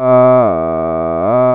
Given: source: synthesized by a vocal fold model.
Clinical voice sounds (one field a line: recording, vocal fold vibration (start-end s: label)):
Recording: sustained vowel that changes in the middle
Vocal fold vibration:
0.00-0.37 s: 127.1 Hz, open quotient 0.38
0.57-1.17 s: 81.3 Hz, open quotient 0.21
1.37-1.55 s: 127.1 Hz, open quotient 0.38